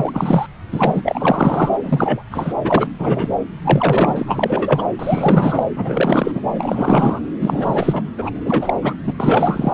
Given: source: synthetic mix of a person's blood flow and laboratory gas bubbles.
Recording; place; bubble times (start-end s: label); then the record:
Doppler ultrasound of blood flow; subclavian vein
0.00-0.47 s: bubbles
0.72-1.78 s: bubbles
1.83-2.22 s: bubbles
2.31-2.53 s: bubbles
2.63-2.87 s: bubbles
2.98-3.29 s: bubbles
3.62-4.83 s: bubbles
4.99-5.63 s: bubbles
5.75-6.41 s: bubbles
6.54-7.20 s: bubbles
7.41-8.03 s: bubbles
8.18-8.30 s: bubbles
8.35-8.40 s: bubbles
8.45-8.74 s: bubbles
8.81-8.96 s: bubbles
9.04-9.13 s: bubbles
9.17-9.73 s: bubbles
From the record:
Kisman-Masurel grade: 343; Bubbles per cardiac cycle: rolling drumbeat, 9 or more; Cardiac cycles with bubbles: 100%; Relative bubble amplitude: loud (0.450 to 0.775); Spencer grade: 3 (all of the cardiac periods contain showers or single bubble signals, but not dominating or overriding the cardiac motion signals); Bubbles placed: anywhere in the cardiac cycle